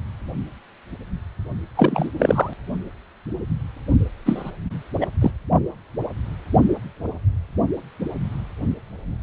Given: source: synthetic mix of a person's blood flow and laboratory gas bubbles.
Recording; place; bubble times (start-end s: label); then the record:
Doppler ultrasound of blood flow; precordium
1.75-2.09 s: bubbles
2.19-2.53 s: bubbles
4.25-4.51 s: bubbles
5.00-5.06 s: bubbles
5.21-5.30 s: bubbles
From the record:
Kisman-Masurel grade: 223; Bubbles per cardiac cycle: several, 3 to 8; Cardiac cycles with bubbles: 10 to 50%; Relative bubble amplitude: loud (0.450 to 0.775); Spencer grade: 2 (many but less than half of the cardiac periods contain bubble signals, singularly or in groups); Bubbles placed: only in the low amplitude regions of the cardiac cycle